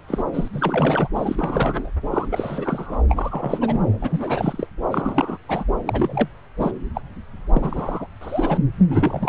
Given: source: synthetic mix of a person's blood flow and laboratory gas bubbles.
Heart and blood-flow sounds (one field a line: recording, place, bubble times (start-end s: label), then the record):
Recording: Doppler ultrasound of blood flow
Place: subclavian vein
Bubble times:
0.08-0.24 s: bubbles
0.34-0.48 s: bubbles
0.52-1.09 s: bubbles
1.15-1.91 s: bubbles
2.10-2.98 s: bubbles
3.09-3.81 s: bubbles
4.00-4.67 s: bubbles
4.91-5.38 s: bubbles
5.49-5.64 s: bubbles
5.85-6.28 s: bubbles
6.57-6.72 s: bubbles
6.94-7.01 s: bubbles
7.53-8.07 s: bubbles
8.21-8.58 s: bubbles
8.90-9.29 s: bubbles
From the record:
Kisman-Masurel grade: 342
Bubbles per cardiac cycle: rolling drumbeat, 9 or more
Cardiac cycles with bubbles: 100%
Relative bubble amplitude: moderate (0.250 to 0.450)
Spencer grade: 3 (all of the cardiac periods contain showers or single bubble signals, but not dominating or overriding the cardiac motion signals)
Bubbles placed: anywhere in the cardiac cycle